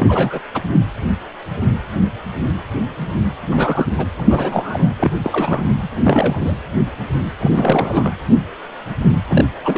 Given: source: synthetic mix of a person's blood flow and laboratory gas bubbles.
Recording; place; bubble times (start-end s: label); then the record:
Doppler ultrasound of blood flow; precordium
0.00-0.40 s: bubbles
0.54-0.62 s: bubbles
3.50-3.94 s: bubbles
3.97-4.06 s: bubbles
4.18-4.92 s: bubbles
5.00-5.12 s: bubbles
5.24-5.74 s: bubbles
5.82-5.89 s: bubbles
6.04-6.56 s: bubbles
7.40-7.50 s: bubbles
7.54-8.14 s: bubbles
9.28-9.46 s: bubbles
9.62-9.78 s: bubbles
From the record:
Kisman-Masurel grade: 332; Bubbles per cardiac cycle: rolling drumbeat, 9 or more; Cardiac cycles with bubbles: 50 to 99%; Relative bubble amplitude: moderate (0.250 to 0.450); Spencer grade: 3 (all of the cardiac periods contain showers or single bubble signals, but not dominating or overriding the cardiac motion signals); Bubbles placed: anywhere in the cardiac cycle